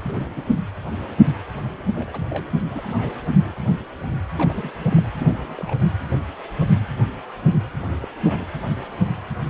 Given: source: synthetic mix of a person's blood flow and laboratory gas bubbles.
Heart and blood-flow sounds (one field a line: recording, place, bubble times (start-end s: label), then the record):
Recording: Doppler ultrasound of blood flow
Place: precordium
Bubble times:
0.04-0.32 s: bubbles
0.36-0.42 s: bubbles
0.56-0.60 s: bubbles
1.95-2.26 s: bubbles
2.29-2.44 s: bubbles
2.69-3.18 s: bubbles
3.26-3.52 s: bubbles
4.34-4.73 s: bubbles
4.90-5.11 s: bubbles
5.17-5.90 s: bubbles
8.01-8.07 s: bubbles
8.23-8.46 s: bubbles
From the record:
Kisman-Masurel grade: 221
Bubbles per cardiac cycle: several, 3 to 8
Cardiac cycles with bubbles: 10 to 50%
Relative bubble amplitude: barely perceptible (0.100 to 0.250)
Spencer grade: 2 (many but less than half of the cardiac periods contain bubble signals, singularly or in groups)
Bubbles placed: anywhere in the cardiac cycle